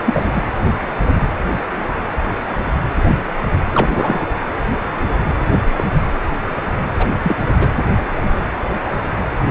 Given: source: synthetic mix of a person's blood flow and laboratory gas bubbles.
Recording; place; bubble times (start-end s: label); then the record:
Doppler ultrasound of blood flow; precordium
0.05-0.42 s: bubbles
3.70-4.26 s: bubbles
5.52-5.63 s: bubbles
5.76-5.84 s: bubbles
5.92-6.07 s: bubbles
6.99-7.13 s: bubbles
7.23-7.36 s: bubbles
7.58-7.69 s: bubbles
From the record:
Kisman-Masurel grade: 222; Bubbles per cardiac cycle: several, 3 to 8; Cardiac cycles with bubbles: 10 to 50%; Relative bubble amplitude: moderate (0.250 to 0.450); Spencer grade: 2 (many but less than half of the cardiac periods contain bubble signals, singularly or in groups); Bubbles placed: anywhere in the cardiac cycle